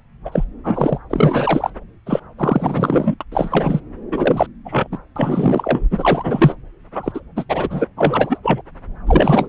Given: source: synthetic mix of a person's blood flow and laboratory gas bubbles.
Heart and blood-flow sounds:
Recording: Doppler ultrasound of blood flow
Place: subclavian vein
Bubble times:
0.25-0.44 s: bubbles
0.64-0.98 s: bubbles
1.09-1.70 s: bubbles
2.06-2.21 s: bubbles
2.38-3.15 s: bubbles
3.21-3.24 s: bubbles
3.31-3.81 s: bubbles
4.12-4.46 s: bubbles
4.65-4.88 s: bubbles
4.92-4.98 s: bubbles
5.16-5.86 s: bubbles
5.91-6.56 s: bubbles
6.95-7.20 s: bubbles
7.36-7.45 s: bubbles
7.49-7.85 s: bubbles
7.97-8.38 s: bubbles
8.42-8.61 s: bubbles
9.06-9.49 s: bubbles
From the record:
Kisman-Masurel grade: 343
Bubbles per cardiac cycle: rolling drumbeat, 9 or more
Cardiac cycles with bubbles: 100%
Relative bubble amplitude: loud (0.450 to 0.775)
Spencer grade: 3 (all of the cardiac periods contain showers or single bubble signals, but not dominating or overriding the cardiac motion signals)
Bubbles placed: anywhere in the cardiac cycle

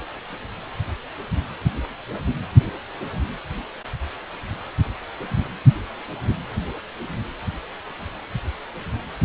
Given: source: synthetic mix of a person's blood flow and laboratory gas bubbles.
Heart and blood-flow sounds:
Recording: Doppler ultrasound of blood flow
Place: precordium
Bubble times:
no bubbles
From the record:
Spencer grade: 0 (complete lack of bubble signals)

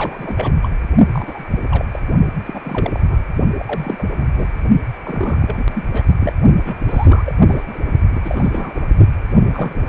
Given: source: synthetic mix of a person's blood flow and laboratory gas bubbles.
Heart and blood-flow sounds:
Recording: Doppler ultrasound of blood flow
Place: precordium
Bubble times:
0.00-0.57 s: bubbles
0.62-0.70 s: bubbles
1.12-1.45 s: bubbles
1.51-1.58 s: bubbles
1.70-1.85 s: bubbles
1.92-2.00 s: bubbles
2.46-3.02 s: bubbles
3.09-3.17 s: bubbles
3.55-4.05 s: bubbles
4.19-4.26 s: bubbles
4.37-4.47 s: bubbles
5.03-5.87 s: bubbles
5.92-6.04 s: bubbles
6.20-6.33 s: bubbles
6.64-6.75 s: bubbles
6.88-7.35 s: bubbles
7.39-7.64 s: bubbles
7.67-7.79 s: bubbles
8.11-8.20 s: bubbles
8.24-8.89 s: bubbles
9.51-9.80 s: bubbles
From the record:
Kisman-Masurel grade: 342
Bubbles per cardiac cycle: rolling drumbeat, 9 or more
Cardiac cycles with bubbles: 100%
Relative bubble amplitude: moderate (0.250 to 0.450)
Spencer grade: 3 (all of the cardiac periods contain showers or single bubble signals, but not dominating or overriding the cardiac motion signals)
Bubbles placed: only in the low amplitude regions of the cardiac cycle

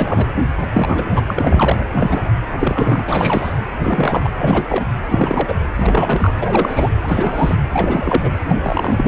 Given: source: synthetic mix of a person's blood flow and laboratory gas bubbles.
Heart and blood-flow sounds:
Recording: Doppler ultrasound of blood flow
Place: precordium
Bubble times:
0.00-0.32 s: bubbles
0.59-1.22 s: bubbles
1.28-1.85 s: bubbles
1.92-2.31 s: bubbles
2.50-3.03 s: bubbles
3.07-3.53 s: bubbles
3.79-4.31 s: bubbles
4.37-4.87 s: bubbles
5.10-5.57 s: bubbles
5.78-6.40 s: bubbles
6.42-6.90 s: bubbles
7.02-7.56 s: bubbles
7.73-8.30 s: bubbles
8.48-9.08 s: bubbles
From the record:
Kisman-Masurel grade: 343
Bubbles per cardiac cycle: rolling drumbeat, 9 or more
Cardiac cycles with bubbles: 100%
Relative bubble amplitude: loud (0.450 to 0.775)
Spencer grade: 3 (all of the cardiac periods contain showers or single bubble signals, but not dominating or overriding the cardiac motion signals)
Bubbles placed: anywhere in the cardiac cycle

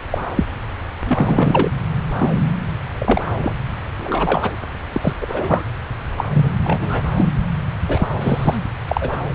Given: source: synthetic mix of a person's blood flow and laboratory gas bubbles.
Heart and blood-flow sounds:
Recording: Doppler ultrasound of blood flow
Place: subclavian vein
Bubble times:
0.10-0.22 s: bubbles
0.35-0.45 s: bubbles
1.05-1.70 s: bubbles
2.18-2.29 s: bubbles
2.98-3.21 s: bubbles
3.41-3.54 s: bubbles
4.00-4.51 s: bubbles
4.92-5.13 s: bubbles
5.21-5.63 s: bubbles
6.16-6.24 s: bubbles
6.33-6.60 s: bubbles
6.63-7.04 s: bubbles
7.17-7.26 s: bubbles
7.83-8.08 s: bubbles
8.21-8.58 s: bubbles
8.88-9.16 s: bubbles
From the record:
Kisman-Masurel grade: 243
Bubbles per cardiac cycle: several, 3 to 8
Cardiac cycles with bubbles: 100%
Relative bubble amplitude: loud (0.450 to 0.775)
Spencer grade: 3 (all of the cardiac periods contain showers or single bubble signals, but not dominating or overriding the cardiac motion signals)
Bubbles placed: anywhere in the cardiac cycle

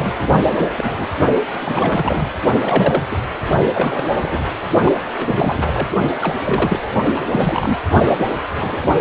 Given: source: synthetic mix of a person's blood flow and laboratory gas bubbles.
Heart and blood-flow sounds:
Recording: Doppler ultrasound of blood flow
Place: precordium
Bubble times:
0.00-0.27 s: bubbles
0.52-1.08 s: bubbles
1.66-2.28 s: bubbles
2.61-3.02 s: bubbles
3.11-3.17 s: bubbles
3.73-4.44 s: bubbles
4.85-4.92 s: bubbles
5.06-5.90 s: bubbles
6.21-6.36 s: bubbles
6.45-6.79 s: bubbles
7.04-7.28 s: bubbles
7.32-7.78 s: bubbles
8.04-8.46 s: bubbles
8.48-8.84 s: bubbles
From the record:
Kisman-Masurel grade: 242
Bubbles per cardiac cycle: several, 3 to 8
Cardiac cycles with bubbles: 100%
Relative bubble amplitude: moderate (0.250 to 0.450)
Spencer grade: 3 (all of the cardiac periods contain showers or single bubble signals, but not dominating or overriding the cardiac motion signals)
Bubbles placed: only in the low amplitude regions of the cardiac cycle

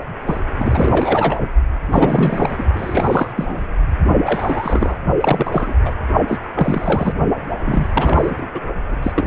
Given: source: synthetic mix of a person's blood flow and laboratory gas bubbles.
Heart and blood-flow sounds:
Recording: Doppler ultrasound of blood flow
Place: precordium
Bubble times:
0.26-0.41 s: bubbles
0.58-1.51 s: bubbles
1.92-2.65 s: bubbles
2.75-3.32 s: bubbles
3.36-3.62 s: bubbles
4.25-4.96 s: bubbles
5.21-5.74 s: bubbles
5.85-5.91 s: bubbles
6.27-6.38 s: bubbles
6.54-7.13 s: bubbles
7.65-7.89 s: bubbles
7.93-8.48 s: bubbles
8.54-8.61 s: bubbles
8.91-8.96 s: bubbles
9.03-9.12 s: bubbles
9.16-9.27 s: bubbles
From the record:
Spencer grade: 3 (all of the cardiac periods contain showers or single bubble signals, but not dominating or overriding the cardiac motion signals)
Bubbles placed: only in the low amplitude regions of the cardiac cycle

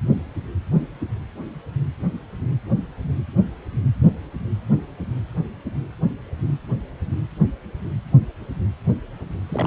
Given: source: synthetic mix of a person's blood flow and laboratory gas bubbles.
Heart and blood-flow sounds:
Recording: Doppler ultrasound of blood flow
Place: precordium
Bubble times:
9.49-9.67 s: bubbles
From the record:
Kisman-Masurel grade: 211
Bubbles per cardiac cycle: several, 3 to 8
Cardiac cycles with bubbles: 1 to 10%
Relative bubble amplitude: barely perceptible (0.100 to 0.250)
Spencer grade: 1 (occasional bubble signal discernible with the cardiac motion signal, with majority of cardiac periods free of bubbles)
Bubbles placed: anywhere in the cardiac cycle

